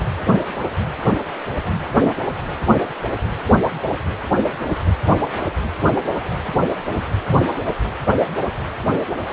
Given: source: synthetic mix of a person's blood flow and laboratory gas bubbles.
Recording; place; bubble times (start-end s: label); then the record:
Doppler ultrasound of blood flow; precordium
no bubbles
From the record:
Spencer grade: 0 (complete lack of bubble signals)